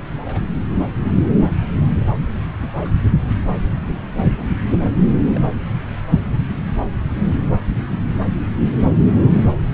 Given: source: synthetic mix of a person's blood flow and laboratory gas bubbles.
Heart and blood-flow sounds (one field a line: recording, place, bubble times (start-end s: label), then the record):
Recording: Doppler ultrasound of blood flow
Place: subclavian vein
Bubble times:
0.25-0.41 s: bubbles
2.60-2.91 s: bubbles
4.37-4.46 s: bubbles
4.91-5.14 s: bubbles
5.35-5.41 s: bubbles
From the record:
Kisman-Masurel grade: 121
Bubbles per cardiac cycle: 1 to 2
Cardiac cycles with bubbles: 10 to 50%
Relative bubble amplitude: barely perceptible (0.100 to 0.250)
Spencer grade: 2 (many but less than half of the cardiac periods contain bubble signals, singularly or in groups)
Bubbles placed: anywhere in the cardiac cycle